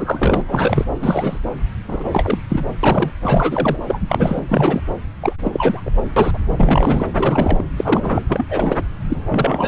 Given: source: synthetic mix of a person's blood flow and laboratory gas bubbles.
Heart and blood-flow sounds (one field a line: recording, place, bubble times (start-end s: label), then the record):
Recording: Doppler ultrasound of blood flow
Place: subclavian vein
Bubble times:
0.00-0.42 s: bubbles
0.47-0.86 s: bubbles
1.00-1.40 s: bubbles
1.43-1.49 s: bubbles
1.88-2.40 s: bubbles
2.48-2.65 s: bubbles
2.83-3.10 s: bubbles
3.21-3.78 s: bubbles
3.87-3.98 s: bubbles
4.08-4.41 s: bubbles
4.48-4.82 s: bubbles
5.21-5.36 s: bubbles
5.44-5.82 s: bubbles
5.85-5.90 s: bubbles
5.97-6.03 s: bubbles
6.16-6.39 s: bubbles
6.57-7.07 s: bubbles
7.13-7.64 s: bubbles
7.78-8.22 s: bubbles
8.28-8.46 s: bubbles
8.50-8.78 s: bubbles
9.09-9.17 s: bubbles
9.29-9.68 s: bubbles
From the record:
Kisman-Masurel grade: 343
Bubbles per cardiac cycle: rolling drumbeat, 9 or more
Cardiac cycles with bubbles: 100%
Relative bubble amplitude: loud (0.450 to 0.775)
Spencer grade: 3 (all of the cardiac periods contain showers or single bubble signals, but not dominating or overriding the cardiac motion signals)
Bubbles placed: anywhere in the cardiac cycle